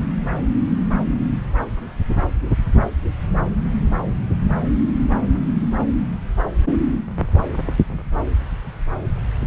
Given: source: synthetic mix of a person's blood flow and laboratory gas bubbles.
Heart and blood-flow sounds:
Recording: Doppler ultrasound of blood flow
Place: subclavian vein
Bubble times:
no bubbles
From the record:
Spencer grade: 0 (complete lack of bubble signals)

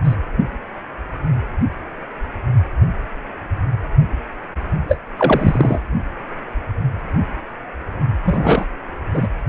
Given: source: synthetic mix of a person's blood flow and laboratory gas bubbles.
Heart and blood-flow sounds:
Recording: Doppler ultrasound of blood flow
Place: precordium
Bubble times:
0.04-0.16 s: bubbles
4.88-4.97 s: bubbles
5.17-5.79 s: bubbles
8.25-8.65 s: bubbles
9.13-9.28 s: bubbles
From the record:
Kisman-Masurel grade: 223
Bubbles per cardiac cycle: several, 3 to 8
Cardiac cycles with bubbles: 10 to 50%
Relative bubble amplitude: loud (0.450 to 0.775)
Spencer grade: 2 (many but less than half of the cardiac periods contain bubble signals, singularly or in groups)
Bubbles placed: anywhere in the cardiac cycle

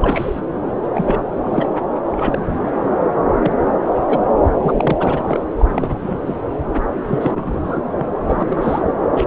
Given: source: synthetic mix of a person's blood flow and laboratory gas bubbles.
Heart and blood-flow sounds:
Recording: Doppler ultrasound of blood flow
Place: subclavian vein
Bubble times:
0.00-0.41 s: bubbles
0.82-0.89 s: bubbles
0.94-1.22 s: bubbles
1.40-1.72 s: bubbles
2.11-2.39 s: bubbles
2.46-2.58 s: bubbles
2.65-2.71 s: bubbles
3.42-3.51 s: bubbles
3.87-3.92 s: bubbles
4.08-4.19 s: bubbles
4.62-4.96 s: bubbles
5.00-5.40 s: bubbles
5.59-6.38 s: bubbles
6.74-6.80 s: bubbles
7.04-7.60 s: bubbles
7.64-7.78 s: bubbles
7.98-8.06 s: bubbles
8.26-8.87 s: bubbles
9.17-9.25 s: bubbles
From the record:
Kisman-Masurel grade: 242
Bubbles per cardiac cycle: several, 3 to 8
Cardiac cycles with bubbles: 100%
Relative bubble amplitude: moderate (0.250 to 0.450)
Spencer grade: 3 (all of the cardiac periods contain showers or single bubble signals, but not dominating or overriding the cardiac motion signals)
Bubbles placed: anywhere in the cardiac cycle

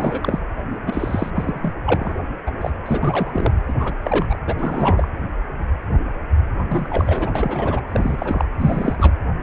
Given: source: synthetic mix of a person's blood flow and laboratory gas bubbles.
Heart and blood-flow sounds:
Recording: Doppler ultrasound of blood flow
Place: precordium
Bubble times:
0.00-0.40 s: bubbles
0.86-1.30 s: bubbles
1.35-1.73 s: bubbles
1.85-2.23 s: bubbles
2.46-2.51 s: bubbles
2.61-2.71 s: bubbles
2.85-3.52 s: bubbles
3.69-3.74 s: bubbles
3.79-3.93 s: bubbles
4.04-4.38 s: bubbles
4.46-4.54 s: bubbles
4.58-5.08 s: bubbles
6.68-7.31 s: bubbles
7.35-7.81 s: bubbles
7.92-8.45 s: bubbles
8.59-8.96 s: bubbles
8.99-9.13 s: bubbles
From the record:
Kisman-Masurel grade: 332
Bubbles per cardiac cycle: rolling drumbeat, 9 or more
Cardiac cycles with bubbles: 50 to 99%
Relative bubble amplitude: moderate (0.250 to 0.450)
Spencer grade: 3 (all of the cardiac periods contain showers or single bubble signals, but not dominating or overriding the cardiac motion signals)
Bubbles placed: anywhere in the cardiac cycle

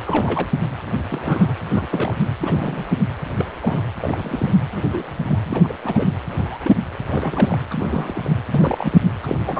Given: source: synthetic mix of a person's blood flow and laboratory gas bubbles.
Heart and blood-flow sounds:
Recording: Doppler ultrasound of blood flow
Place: precordium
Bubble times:
0.04-0.48 s: bubbles
0.92-0.97 s: bubbles
1.10-1.54 s: bubbles
1.71-1.86 s: bubbles
1.90-2.15 s: bubbles
2.40-2.85 s: bubbles
3.37-3.46 s: bubbles
3.62-3.84 s: bubbles
4.00-4.54 s: bubbles
4.76-5.21 s: bubbles
5.25-5.39 s: bubbles
5.43-5.76 s: bubbles
5.84-6.05 s: bubbles
6.35-6.58 s: bubbles
6.64-6.75 s: bubbles
7.09-7.60 s: bubbles
7.71-8.37 s: bubbles
8.49-8.98 s: bubbles
9.22-9.38 s: bubbles
9.46-9.60 s: bubbles
From the record:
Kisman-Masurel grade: 242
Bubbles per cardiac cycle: several, 3 to 8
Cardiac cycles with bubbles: 100%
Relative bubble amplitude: moderate (0.250 to 0.450)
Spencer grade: 3 (all of the cardiac periods contain showers or single bubble signals, but not dominating or overriding the cardiac motion signals)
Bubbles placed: anywhere in the cardiac cycle

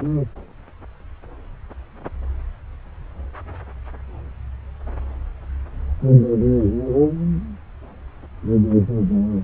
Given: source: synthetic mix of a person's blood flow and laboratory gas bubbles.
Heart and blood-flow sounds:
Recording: Doppler ultrasound of blood flow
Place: subclavian vein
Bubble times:
no bubbles
From the record:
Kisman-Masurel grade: 000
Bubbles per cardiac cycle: 0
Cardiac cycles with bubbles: 0%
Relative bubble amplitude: no bubbles discernible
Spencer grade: 0 (complete lack of bubble signals)

